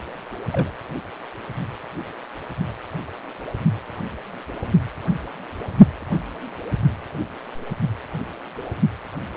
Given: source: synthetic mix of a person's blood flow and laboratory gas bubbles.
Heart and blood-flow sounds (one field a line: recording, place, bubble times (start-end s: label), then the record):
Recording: Doppler ultrasound of blood flow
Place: precordium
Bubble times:
0.52-0.70 s: bubbles
From the record:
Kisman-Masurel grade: 111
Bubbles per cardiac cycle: 1 to 2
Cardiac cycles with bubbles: 1 to 10%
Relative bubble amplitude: barely perceptible (0.100 to 0.250)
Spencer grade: 1 (occasional bubble signal discernible with the cardiac motion signal, with majority of cardiac periods free of bubbles)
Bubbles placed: only in the low amplitude regions of the cardiac cycle